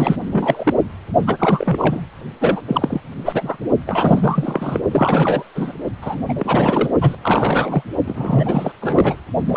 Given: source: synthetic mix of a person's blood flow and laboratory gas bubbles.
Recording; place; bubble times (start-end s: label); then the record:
Doppler ultrasound of blood flow; precordium
0.00-0.16 s: bubbles
0.32-0.74 s: bubbles
1.26-2.01 s: bubbles
2.41-2.62 s: bubbles
2.67-3.01 s: bubbles
3.25-3.57 s: bubbles
3.87-4.79 s: bubbles
4.91-5.43 s: bubbles
5.55-5.73 s: bubbles
6.01-6.23 s: bubbles
6.28-6.33 s: bubbles
6.38-6.90 s: bubbles
7.01-7.15 s: bubbles
7.23-7.83 s: bubbles
8.05-8.72 s: bubbles
8.81-9.16 s: bubbles
9.47-9.57 s: bubbles
From the record:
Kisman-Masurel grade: 343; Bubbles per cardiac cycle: rolling drumbeat, 9 or more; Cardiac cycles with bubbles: 100%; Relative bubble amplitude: loud (0.450 to 0.775); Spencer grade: 3 (all of the cardiac periods contain showers or single bubble signals, but not dominating or overriding the cardiac motion signals); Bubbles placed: only in the low amplitude regions of the cardiac cycle